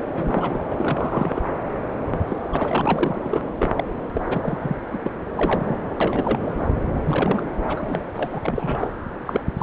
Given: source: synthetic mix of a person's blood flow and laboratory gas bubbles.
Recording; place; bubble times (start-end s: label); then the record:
Doppler ultrasound of blood flow; subclavian vein
0.00-0.06 s: bubbles
0.16-0.67 s: bubbles
0.70-1.42 s: bubbles
2.27-2.39 s: bubbles
2.52-3.52 s: bubbles
3.59-3.71 s: bubbles
3.75-3.84 s: bubbles
4.13-4.21 s: bubbles
4.25-4.75 s: bubbles
4.92-4.98 s: bubbles
5.04-5.11 s: bubbles
5.36-5.75 s: bubbles
6.00-6.68 s: bubbles
6.94-7.46 s: bubbles
7.67-8.00 s: bubbles
8.13-8.39 s: bubbles
8.42-8.88 s: bubbles
9.26-9.41 s: bubbles
9.57-9.63 s: bubbles
From the record:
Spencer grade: 3 (all of the cardiac periods contain showers or single bubble signals, but not dominating or overriding the cardiac motion signals); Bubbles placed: anywhere in the cardiac cycle